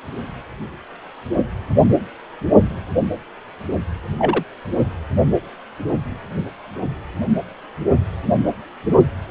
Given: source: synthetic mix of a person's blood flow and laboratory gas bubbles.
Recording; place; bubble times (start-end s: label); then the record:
Doppler ultrasound of blood flow; precordium
4.19-4.44 s: bubbles
From the record:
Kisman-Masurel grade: 112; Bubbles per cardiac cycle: 1 to 2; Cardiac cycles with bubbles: 1 to 10%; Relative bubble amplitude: moderate (0.250 to 0.450); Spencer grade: 1 (occasional bubble signal discernible with the cardiac motion signal, with majority of cardiac periods free of bubbles); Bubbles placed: only in the low amplitude regions of the cardiac cycle